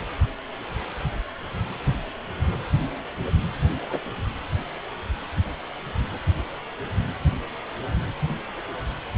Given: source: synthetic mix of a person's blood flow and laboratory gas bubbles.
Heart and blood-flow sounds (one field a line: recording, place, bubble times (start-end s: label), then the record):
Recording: Doppler ultrasound of blood flow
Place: precordium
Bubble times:
3.90-4.01 s: bubbles
From the record:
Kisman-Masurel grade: 111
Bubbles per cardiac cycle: 1 to 2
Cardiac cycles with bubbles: 1 to 10%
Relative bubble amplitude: barely perceptible (0.100 to 0.250)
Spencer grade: 1 (occasional bubble signal discernible with the cardiac motion signal, with majority of cardiac periods free of bubbles)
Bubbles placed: anywhere in the cardiac cycle